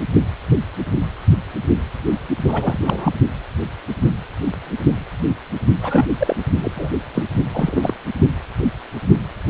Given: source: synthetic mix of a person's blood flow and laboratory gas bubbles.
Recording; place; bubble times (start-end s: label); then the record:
Doppler ultrasound of blood flow; precordium
2.47-3.14 s: bubbles
5.82-6.06 s: bubbles
6.19-6.36 s: bubbles
6.62-6.71 s: bubbles
6.75-6.89 s: bubbles
7.13-7.28 s: bubbles
7.54-7.94 s: bubbles
From the record:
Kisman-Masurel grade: 222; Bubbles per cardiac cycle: several, 3 to 8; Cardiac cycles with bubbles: 10 to 50%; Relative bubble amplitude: moderate (0.250 to 0.450); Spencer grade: 2 (many but less than half of the cardiac periods contain bubble signals, singularly or in groups); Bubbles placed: only in the low amplitude regions of the cardiac cycle